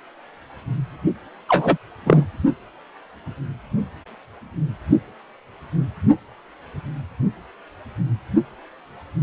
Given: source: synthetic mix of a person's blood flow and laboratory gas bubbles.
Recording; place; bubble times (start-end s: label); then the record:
Doppler ultrasound of blood flow; precordium
1.49-1.77 s: bubbles
2.06-2.26 s: bubbles
From the record:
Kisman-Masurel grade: 223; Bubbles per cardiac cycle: several, 3 to 8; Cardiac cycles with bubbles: 10 to 50%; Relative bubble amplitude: loud (0.450 to 0.775); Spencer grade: 2 (many but less than half of the cardiac periods contain bubble signals, singularly or in groups); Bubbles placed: only in the low amplitude regions of the cardiac cycle